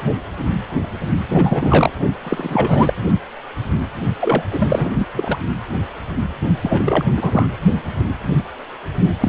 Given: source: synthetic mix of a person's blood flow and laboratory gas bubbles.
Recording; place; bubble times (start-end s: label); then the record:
Doppler ultrasound of blood flow; precordium
1.28-1.92 s: bubbles
2.21-2.94 s: bubbles
4.21-4.42 s: bubbles
4.50-5.37 s: bubbles
6.62-7.04 s: bubbles
7.17-7.48 s: bubbles
9.20-9.29 s: bubbles
From the record:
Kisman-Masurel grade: 333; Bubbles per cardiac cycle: rolling drumbeat, 9 or more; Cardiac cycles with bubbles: 50 to 99%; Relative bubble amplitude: loud (0.450 to 0.775); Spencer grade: 3 (all of the cardiac periods contain showers or single bubble signals, but not dominating or overriding the cardiac motion signals); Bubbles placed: only in the low amplitude regions of the cardiac cycle